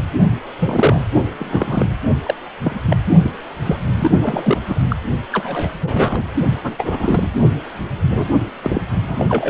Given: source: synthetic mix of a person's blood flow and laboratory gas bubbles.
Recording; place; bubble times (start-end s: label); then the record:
Doppler ultrasound of blood flow; precordium
0.59-1.04 s: bubbles
1.39-1.88 s: bubbles
2.25-2.34 s: bubbles
2.64-2.75 s: bubbles
2.90-2.97 s: bubbles
3.23-3.31 s: bubbles
3.64-3.77 s: bubbles
3.95-4.11 s: bubbles
4.20-4.61 s: bubbles
4.67-4.82 s: bubbles
4.89-4.96 s: bubbles
5.32-5.75 s: bubbles
5.82-6.23 s: bubbles
6.62-7.28 s: bubbles
8.10-8.28 s: bubbles
8.34-8.38 s: bubbles
8.62-8.81 s: bubbles
9.07-9.26 s: bubbles
9.29-9.50 s: bubbles
From the record:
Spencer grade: 3 (all of the cardiac periods contain showers or single bubble signals, but not dominating or overriding the cardiac motion signals); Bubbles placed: only in the low amplitude regions of the cardiac cycle